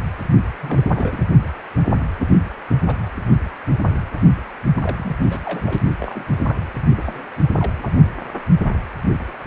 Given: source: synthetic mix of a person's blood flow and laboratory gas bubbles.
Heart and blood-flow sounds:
Doppler ultrasound of blood flow; precordium
0.60-1.28 s: bubbles
2.19-2.47 s: bubbles
2.69-2.75 s: bubbles
2.87-3.06 s: bubbles
4.75-5.16 s: bubbles
5.20-5.82 s: bubbles
6.01-6.25 s: bubbles
6.37-6.63 s: bubbles
6.96-7.31 s: bubbles
7.57-7.71 s: bubbles
7.79-7.91 s: bubbles
From the record:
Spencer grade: 2 (many but less than half of the cardiac periods contain bubble signals, singularly or in groups); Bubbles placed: only in the low amplitude regions of the cardiac cycle

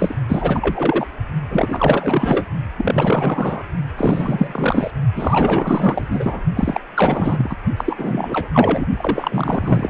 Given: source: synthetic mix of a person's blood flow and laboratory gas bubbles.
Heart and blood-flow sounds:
Doppler ultrasound of blood flow; precordium
0.00-0.15 s: bubbles
0.29-1.06 s: bubbles
1.49-2.46 s: bubbles
2.77-3.64 s: bubbles
3.97-4.91 s: bubbles
5.16-6.44 s: bubbles
6.56-6.80 s: bubbles
6.96-7.55 s: bubbles
7.77-8.48 s: bubbles
8.53-8.86 s: bubbles
8.97-9.90 s: bubbles
From the record:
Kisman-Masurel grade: 444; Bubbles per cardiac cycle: continuous sound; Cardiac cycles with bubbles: 100%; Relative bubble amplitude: maximal (0.775 to 0.999); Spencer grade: 4 (maximum detectable bubble signal sounding continuously throughout systole and diastole of every cardiac period, and overriding the amplitude of the normal cardiac signals); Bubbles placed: only in the low amplitude regions of the cardiac cycle

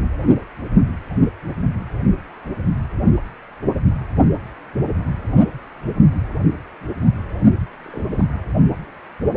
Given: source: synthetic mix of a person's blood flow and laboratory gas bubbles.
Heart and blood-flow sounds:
Doppler ultrasound of blood flow; precordium
7.83-8.03 s: bubbles
8.11-8.25 s: bubbles
From the record:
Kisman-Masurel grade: 121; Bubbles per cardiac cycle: 1 to 2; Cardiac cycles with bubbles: 10 to 50%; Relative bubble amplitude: barely perceptible (0.100 to 0.250); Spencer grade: 2 (many but less than half of the cardiac periods contain bubble signals, singularly or in groups); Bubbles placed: only in the low amplitude regions of the cardiac cycle

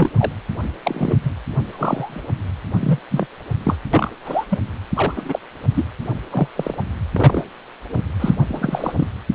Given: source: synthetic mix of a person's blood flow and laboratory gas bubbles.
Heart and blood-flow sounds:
Doppler ultrasound of blood flow; precordium
0.00-0.12 s: bubbles
0.17-0.32 s: bubbles
0.83-1.17 s: bubbles
1.24-1.34 s: bubbles
1.69-2.29 s: bubbles
2.79-2.99 s: bubbles
3.10-3.26 s: bubbles
3.63-3.76 s: bubbles
3.93-4.11 s: bubbles
4.24-4.45 s: bubbles
4.50-4.58 s: bubbles
4.94-5.13 s: bubbles
5.16-5.39 s: bubbles
5.74-5.85 s: bubbles
6.31-6.48 s: bubbles
6.55-6.74 s: bubbles
6.78-6.82 s: bubbles
7.12-7.45 s: bubbles
7.96-8.02 s: bubbles
8.20-8.36 s: bubbles
8.47-9.08 s: bubbles
From the record:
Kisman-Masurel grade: 242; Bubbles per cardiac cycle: several, 3 to 8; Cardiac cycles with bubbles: 100%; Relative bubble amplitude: moderate (0.250 to 0.450); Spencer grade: 3 (all of the cardiac periods contain showers or single bubble signals, but not dominating or overriding the cardiac motion signals); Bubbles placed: anywhere in the cardiac cycle

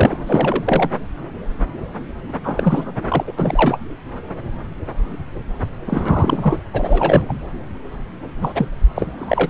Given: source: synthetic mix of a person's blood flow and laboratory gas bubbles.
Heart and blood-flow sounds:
Doppler ultrasound of blood flow; subclavian vein
0.00-0.19 s: bubbles
0.26-0.90 s: bubbles
2.44-2.92 s: bubbles
3.08-3.24 s: bubbles
3.27-3.32 s: bubbles
3.38-3.77 s: bubbles
5.86-6.60 s: bubbles
6.73-7.33 s: bubbles
8.41-8.69 s: bubbles
8.95-9.50 s: bubbles
From the record:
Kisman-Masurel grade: 333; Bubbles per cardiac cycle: rolling drumbeat, 9 or more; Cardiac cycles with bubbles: 50 to 99%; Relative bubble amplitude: loud (0.450 to 0.775); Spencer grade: 3 (all of the cardiac periods contain showers or single bubble signals, but not dominating or overriding the cardiac motion signals); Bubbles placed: anywhere in the cardiac cycle

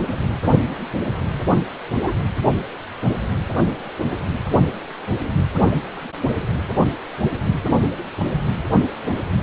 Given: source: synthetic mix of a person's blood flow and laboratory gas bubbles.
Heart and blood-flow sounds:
Doppler ultrasound of blood flow; precordium
1.95-2.12 s: bubbles
From the record:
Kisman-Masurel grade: 113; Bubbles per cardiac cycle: 1 to 2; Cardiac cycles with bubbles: 1 to 10%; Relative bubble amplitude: loud (0.450 to 0.775); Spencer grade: 1 (occasional bubble signal discernible with the cardiac motion signal, with majority of cardiac periods free of bubbles); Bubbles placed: anywhere in the cardiac cycle

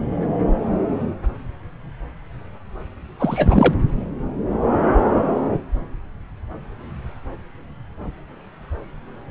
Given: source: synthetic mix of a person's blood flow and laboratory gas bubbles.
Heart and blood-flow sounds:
Doppler ultrasound of blood flow; subclavian vein
3.19-3.73 s: bubbles
From the record:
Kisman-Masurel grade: 223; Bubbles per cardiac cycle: several, 3 to 8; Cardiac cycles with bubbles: 10 to 50%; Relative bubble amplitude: loud (0.450 to 0.775); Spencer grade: 2 (many but less than half of the cardiac periods contain bubble signals, singularly or in groups); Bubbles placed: anywhere in the cardiac cycle

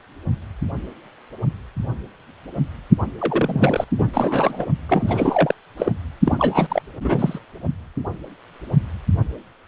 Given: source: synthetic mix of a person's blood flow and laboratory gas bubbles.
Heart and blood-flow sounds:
Doppler ultrasound of blood flow; precordium
3.18-3.84 s: bubbles
3.98-4.08 s: bubbles
4.14-4.66 s: bubbles
4.89-5.54 s: bubbles
5.77-5.92 s: bubbles
6.24-6.67 s: bubbles
6.70-6.82 s: bubbles
7.03-7.39 s: bubbles
From the record:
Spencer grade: 3 (all of the cardiac periods contain showers or single bubble signals, but not dominating or overriding the cardiac motion signals); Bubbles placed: only in the low amplitude regions of the cardiac cycle

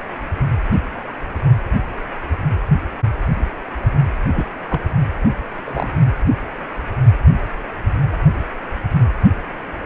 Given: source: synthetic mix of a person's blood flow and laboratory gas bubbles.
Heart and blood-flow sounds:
Doppler ultrasound of blood flow; precordium
4.33-4.45 s: bubbles
4.69-4.80 s: bubbles
5.65-5.88 s: bubbles
From the record:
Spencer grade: 2 (many but less than half of the cardiac periods contain bubble signals, singularly or in groups); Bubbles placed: only in the low amplitude regions of the cardiac cycle

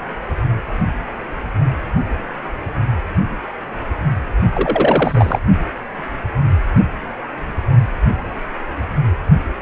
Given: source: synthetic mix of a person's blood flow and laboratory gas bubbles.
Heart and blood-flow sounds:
Doppler ultrasound of blood flow; precordium
4.53-5.39 s: bubbles
From the record:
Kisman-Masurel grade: 213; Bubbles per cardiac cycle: several, 3 to 8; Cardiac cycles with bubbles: 1 to 10%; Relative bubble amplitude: loud (0.450 to 0.775); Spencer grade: 1 (occasional bubble signal discernible with the cardiac motion signal, with majority of cardiac periods free of bubbles); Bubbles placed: only in the low amplitude regions of the cardiac cycle

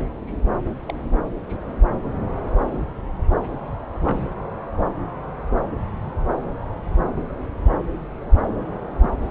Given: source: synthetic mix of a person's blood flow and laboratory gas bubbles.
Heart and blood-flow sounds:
Doppler ultrasound of blood flow; subclavian vein
0.16-0.46 s: bubbles
0.88-0.94 s: bubbles
1.50-1.57 s: bubbles
3.95-3.97 s: bubbles
4.00-4.26 s: bubbles
9.01-9.10 s: bubbles
9.28-9.30 s: bubbles
From the record:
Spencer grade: 2 (many but less than half of the cardiac periods contain bubble signals, singularly or in groups); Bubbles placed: anywhere in the cardiac cycle

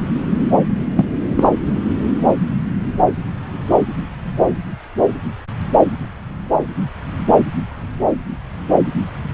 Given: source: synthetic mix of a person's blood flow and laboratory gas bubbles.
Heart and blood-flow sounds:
Doppler ultrasound of blood flow; subclavian vein
0.96-1.04 s: bubbles
1.29-1.48 s: bubbles
From the record:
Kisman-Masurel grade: 213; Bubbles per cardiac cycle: several, 3 to 8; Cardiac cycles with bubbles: 1 to 10%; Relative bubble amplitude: loud (0.450 to 0.775); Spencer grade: 1 (occasional bubble signal discernible with the cardiac motion signal, with majority of cardiac periods free of bubbles); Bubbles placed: anywhere in the cardiac cycle

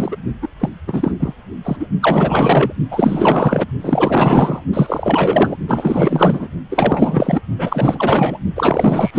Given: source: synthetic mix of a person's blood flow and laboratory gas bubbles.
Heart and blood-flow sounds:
Doppler ultrasound of blood flow; precordium
0.00-0.17 s: bubbles
0.42-0.48 s: bubbles
0.59-0.69 s: bubbles
0.87-1.12 s: bubbles
1.19-1.34 s: bubbles
1.64-1.77 s: bubbles
1.79-1.87 s: bubbles
2.01-2.73 s: bubbles
2.91-3.66 s: bubbles
3.81-4.62 s: bubbles
4.73-5.57 s: bubbles
5.68-6.48 s: bubbles
6.70-7.42 s: bubbles
7.58-8.39 s: bubbles
8.55-9.19 s: bubbles
From the record:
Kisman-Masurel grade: 444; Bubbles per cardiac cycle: continuous sound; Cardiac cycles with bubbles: 100%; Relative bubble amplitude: maximal (0.775 to 0.999); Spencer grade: 4 (maximum detectable bubble signal sounding continuously throughout systole and diastole of every cardiac period, and overriding the amplitude of the normal cardiac signals); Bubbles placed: only in the low amplitude regions of the cardiac cycle

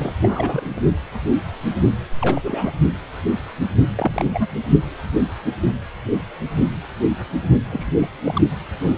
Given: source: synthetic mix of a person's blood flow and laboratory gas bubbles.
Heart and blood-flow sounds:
Doppler ultrasound of blood flow; precordium
0.00-0.18 s: bubbles
0.21-0.80 s: bubbles
2.21-2.72 s: bubbles
3.95-4.47 s: bubbles
7.70-7.92 s: bubbles
7.96-8.08 s: bubbles
8.24-8.42 s: bubbles
From the record:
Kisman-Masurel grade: 222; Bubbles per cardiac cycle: several, 3 to 8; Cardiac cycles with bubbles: 10 to 50%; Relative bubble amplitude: moderate (0.250 to 0.450); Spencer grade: 2 (many but less than half of the cardiac periods contain bubble signals, singularly or in groups); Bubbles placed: only in the low amplitude regions of the cardiac cycle

